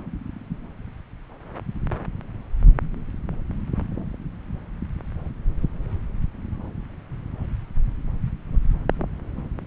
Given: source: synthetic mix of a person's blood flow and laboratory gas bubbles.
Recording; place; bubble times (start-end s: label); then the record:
Doppler ultrasound of blood flow; subclavian vein
no bubbles
From the record:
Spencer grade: 0 (complete lack of bubble signals)